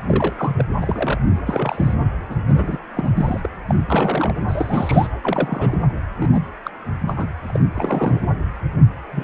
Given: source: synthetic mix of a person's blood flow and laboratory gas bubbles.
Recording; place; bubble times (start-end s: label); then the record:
Doppler ultrasound of blood flow; precordium
0.07-0.70 s: bubbles
0.81-1.19 s: bubbles
1.46-1.94 s: bubbles
2.29-2.35 s: bubbles
2.47-2.79 s: bubbles
2.95-3.11 s: bubbles
3.17-3.41 s: bubbles
3.45-3.47 s: bubbles
3.67-3.75 s: bubbles
3.89-4.42 s: bubbles
4.48-5.07 s: bubbles
5.23-5.80 s: bubbles
6.19-6.29 s: bubbles
6.32-6.42 s: bubbles
6.65-6.71 s: bubbles
7.08-7.27 s: bubbles
7.46-7.59 s: bubbles
7.75-8.20 s: bubbles
9.12-9.24 s: bubbles
From the record:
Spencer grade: 3 (all of the cardiac periods contain showers or single bubble signals, but not dominating or overriding the cardiac motion signals); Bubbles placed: anywhere in the cardiac cycle